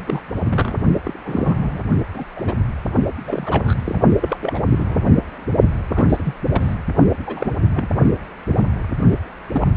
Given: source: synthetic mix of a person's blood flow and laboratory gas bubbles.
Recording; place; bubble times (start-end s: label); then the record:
Doppler ultrasound of blood flow; precordium
0.07-0.20 s: bubbles
0.50-0.76 s: bubbles
1.03-1.19 s: bubbles
1.24-1.82 s: bubbles
2.14-2.24 s: bubbles
2.36-2.54 s: bubbles
3.27-3.75 s: bubbles
3.85-4.00 s: bubbles
4.21-4.37 s: bubbles
4.40-4.61 s: bubbles
4.69-5.11 s: bubbles
5.89-6.33 s: bubbles
6.51-6.75 s: bubbles
7.26-7.53 s: bubbles
7.74-7.89 s: bubbles
8.47-8.59 s: bubbles
9.11-9.17 s: bubbles
9.51-9.67 s: bubbles
From the record:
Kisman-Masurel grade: 242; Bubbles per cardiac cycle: several, 3 to 8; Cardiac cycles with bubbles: 100%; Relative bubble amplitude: moderate (0.250 to 0.450); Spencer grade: 3 (all of the cardiac periods contain showers or single bubble signals, but not dominating or overriding the cardiac motion signals); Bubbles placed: only in the low amplitude regions of the cardiac cycle